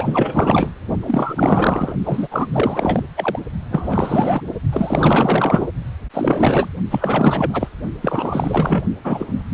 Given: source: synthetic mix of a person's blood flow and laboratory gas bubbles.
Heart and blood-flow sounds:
Doppler ultrasound of blood flow; precordium
0.00-0.71 s: bubbles
1.02-1.94 s: bubbles
2.05-2.28 s: bubbles
2.31-2.49 s: bubbles
2.52-3.03 s: bubbles
3.16-3.39 s: bubbles
3.71-4.42 s: bubbles
4.72-5.68 s: bubbles
6.13-6.68 s: bubbles
6.91-7.68 s: bubbles
8.02-8.82 s: bubbles
9.04-9.45 s: bubbles
9.51-9.53 s: bubbles
From the record:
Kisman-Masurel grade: 444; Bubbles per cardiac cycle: continuous sound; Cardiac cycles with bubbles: 100%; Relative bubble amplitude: maximal (0.775 to 0.999); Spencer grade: 4 (maximum detectable bubble signal sounding continuously throughout systole and diastole of every cardiac period, and overriding the amplitude of the normal cardiac signals); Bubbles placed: only in the low amplitude regions of the cardiac cycle

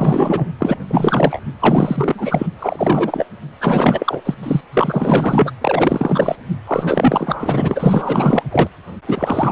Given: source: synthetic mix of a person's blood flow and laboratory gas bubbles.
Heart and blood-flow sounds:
Doppler ultrasound of blood flow; precordium
0.00-0.51 s: bubbles
0.58-0.76 s: bubbles
0.88-1.40 s: bubbles
1.59-2.46 s: bubbles
2.59-3.26 s: bubbles
3.60-4.21 s: bubbles
4.25-4.34 s: bubbles
4.42-4.61 s: bubbles
4.73-5.51 s: bubbles
5.61-6.35 s: bubbles
6.67-8.43 s: bubbles
8.51-8.68 s: bubbles
9.07-9.52 s: bubbles
From the record:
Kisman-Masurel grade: 444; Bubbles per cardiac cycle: continuous sound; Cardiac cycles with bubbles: 100%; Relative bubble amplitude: maximal (0.775 to 0.999); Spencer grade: 4 (maximum detectable bubble signal sounding continuously throughout systole and diastole of every cardiac period, and overriding the amplitude of the normal cardiac signals); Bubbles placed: anywhere in the cardiac cycle

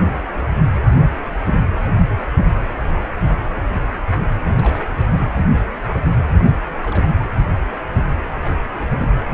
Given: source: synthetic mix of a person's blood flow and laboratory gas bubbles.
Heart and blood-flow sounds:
Doppler ultrasound of blood flow; precordium
0.81-1.02 s: bubbles
1.19-1.36 s: bubbles
4.42-4.85 s: bubbles
4.96-5.08 s: bubbles
6.34-6.40 s: bubbles
6.46-6.58 s: bubbles
6.70-7.06 s: bubbles
8.43-8.57 s: bubbles
8.81-9.09 s: bubbles
From the record:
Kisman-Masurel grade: 221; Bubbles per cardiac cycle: several, 3 to 8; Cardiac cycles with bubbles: 10 to 50%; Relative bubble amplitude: barely perceptible (0.100 to 0.250); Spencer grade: 2 (many but less than half of the cardiac periods contain bubble signals, singularly or in groups); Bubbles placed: anywhere in the cardiac cycle

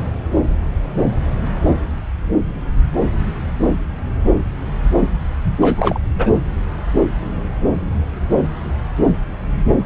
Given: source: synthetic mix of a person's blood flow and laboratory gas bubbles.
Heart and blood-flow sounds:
Doppler ultrasound of blood flow; subclavian vein
5.60-6.00 s: bubbles
6.15-6.31 s: bubbles
From the record:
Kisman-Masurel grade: 213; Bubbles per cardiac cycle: several, 3 to 8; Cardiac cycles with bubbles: 1 to 10%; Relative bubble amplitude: loud (0.450 to 0.775); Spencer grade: 1 (occasional bubble signal discernible with the cardiac motion signal, with majority of cardiac periods free of bubbles); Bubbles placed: anywhere in the cardiac cycle

